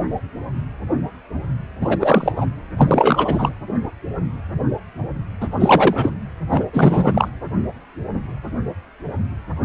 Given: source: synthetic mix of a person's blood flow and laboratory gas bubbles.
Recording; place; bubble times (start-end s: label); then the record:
Doppler ultrasound of blood flow; precordium
1.80-2.32 s: bubbles
2.36-2.47 s: bubbles
2.77-3.50 s: bubbles
5.40-5.47 s: bubbles
5.51-6.13 s: bubbles
6.50-6.65 s: bubbles
6.73-7.29 s: bubbles
From the record:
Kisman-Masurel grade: 333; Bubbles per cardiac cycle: rolling drumbeat, 9 or more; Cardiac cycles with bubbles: 50 to 99%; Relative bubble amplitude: loud (0.450 to 0.775); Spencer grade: 3 (all of the cardiac periods contain showers or single bubble signals, but not dominating or overriding the cardiac motion signals); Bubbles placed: anywhere in the cardiac cycle